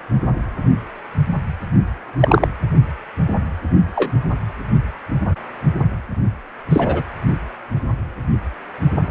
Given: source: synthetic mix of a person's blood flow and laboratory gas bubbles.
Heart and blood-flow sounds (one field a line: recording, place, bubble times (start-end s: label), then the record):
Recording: Doppler ultrasound of blood flow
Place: precordium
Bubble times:
2.20-2.46 s: bubbles
3.95-4.12 s: bubbles
6.70-7.03 s: bubbles
From the record:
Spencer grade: 2 (many but less than half of the cardiac periods contain bubble signals, singularly or in groups)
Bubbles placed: anywhere in the cardiac cycle